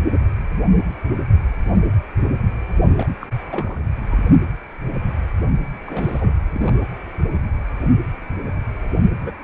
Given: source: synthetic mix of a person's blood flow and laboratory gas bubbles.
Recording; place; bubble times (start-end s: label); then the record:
Doppler ultrasound of blood flow; precordium
2.97-3.07 s: bubbles
3.21-3.27 s: bubbles
3.47-3.80 s: bubbles
4.08-4.19 s: bubbles
5.86-6.33 s: bubbles
6.46-6.82 s: bubbles
9.15-9.35 s: bubbles
From the record:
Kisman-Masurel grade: 221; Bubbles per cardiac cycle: several, 3 to 8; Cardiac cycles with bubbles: 10 to 50%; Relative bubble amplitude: barely perceptible (0.100 to 0.250); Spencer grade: 2 (many but less than half of the cardiac periods contain bubble signals, singularly or in groups); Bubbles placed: only in the low amplitude regions of the cardiac cycle